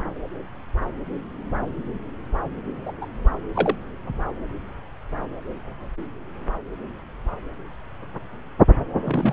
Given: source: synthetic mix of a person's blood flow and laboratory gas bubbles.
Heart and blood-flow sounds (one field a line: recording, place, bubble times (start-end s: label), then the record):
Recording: Doppler ultrasound of blood flow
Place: subclavian vein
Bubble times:
2.86-2.92 s: bubbles
3.02-3.06 s: bubbles
3.55-3.75 s: bubbles
9.03-9.33 s: bubbles
From the record:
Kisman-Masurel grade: 122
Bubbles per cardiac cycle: 1 to 2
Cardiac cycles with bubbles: 10 to 50%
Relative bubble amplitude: moderate (0.250 to 0.450)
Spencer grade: 2 (many but less than half of the cardiac periods contain bubble signals, singularly or in groups)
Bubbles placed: anywhere in the cardiac cycle